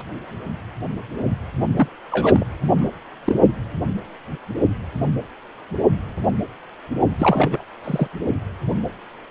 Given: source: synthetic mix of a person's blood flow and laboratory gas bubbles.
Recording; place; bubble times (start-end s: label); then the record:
Doppler ultrasound of blood flow; precordium
1.76-1.88 s: bubbles
2.11-2.46 s: bubbles
2.74-2.88 s: bubbles
3.25-3.36 s: bubbles
7.19-7.61 s: bubbles
7.84-8.08 s: bubbles
From the record:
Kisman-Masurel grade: 222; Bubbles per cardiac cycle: several, 3 to 8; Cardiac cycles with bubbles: 10 to 50%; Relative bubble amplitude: moderate (0.250 to 0.450); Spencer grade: 2 (many but less than half of the cardiac periods contain bubble signals, singularly or in groups); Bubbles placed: only in the low amplitude regions of the cardiac cycle